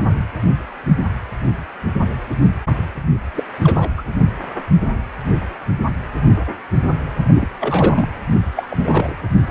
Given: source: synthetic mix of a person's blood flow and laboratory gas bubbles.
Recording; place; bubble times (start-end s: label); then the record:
Doppler ultrasound of blood flow; precordium
0.00-0.04 s: bubbles
3.35-3.44 s: bubbles
3.63-3.89 s: bubbles
3.96-4.02 s: bubbles
7.31-7.47 s: bubbles
7.60-8.07 s: bubbles
8.56-8.68 s: bubbles
8.71-9.15 s: bubbles
From the record:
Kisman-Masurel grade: 222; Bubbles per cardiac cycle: several, 3 to 8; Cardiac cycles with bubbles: 10 to 50%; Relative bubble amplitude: moderate (0.250 to 0.450); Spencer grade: 2 (many but less than half of the cardiac periods contain bubble signals, singularly or in groups); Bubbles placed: anywhere in the cardiac cycle